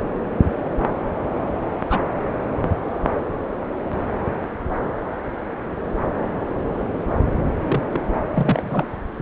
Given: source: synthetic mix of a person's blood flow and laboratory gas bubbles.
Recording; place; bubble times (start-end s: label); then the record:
Doppler ultrasound of blood flow; subclavian vein
1.90-2.00 s: bubbles
7.63-7.83 s: bubbles
7.92-8.00 s: bubbles
8.34-8.88 s: bubbles
From the record:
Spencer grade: 2 (many but less than half of the cardiac periods contain bubble signals, singularly or in groups); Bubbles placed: anywhere in the cardiac cycle